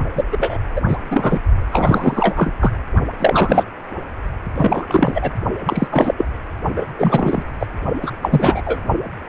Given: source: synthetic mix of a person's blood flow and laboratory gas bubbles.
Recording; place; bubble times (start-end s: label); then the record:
Doppler ultrasound of blood flow; precordium
0.15-0.24 s: bubbles
0.32-0.57 s: bubbles
0.75-0.81 s: bubbles
0.88-0.96 s: bubbles
1.10-1.39 s: bubbles
1.72-2.52 s: bubbles
2.60-2.72 s: bubbles
3.19-3.65 s: bubbles
4.55-5.31 s: bubbles
5.66-5.88 s: bubbles
5.91-6.14 s: bubbles
6.17-6.26 s: bubbles
6.75-6.85 s: bubbles
6.99-7.42 s: bubbles
7.59-7.67 s: bubbles
8.02-8.12 s: bubbles
8.22-8.62 s: bubbles
8.65-8.80 s: bubbles
From the record:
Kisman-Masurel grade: 333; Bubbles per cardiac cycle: rolling drumbeat, 9 or more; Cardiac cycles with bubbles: 50 to 99%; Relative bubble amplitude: loud (0.450 to 0.775); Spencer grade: 3 (all of the cardiac periods contain showers or single bubble signals, but not dominating or overriding the cardiac motion signals); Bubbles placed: only in the low amplitude regions of the cardiac cycle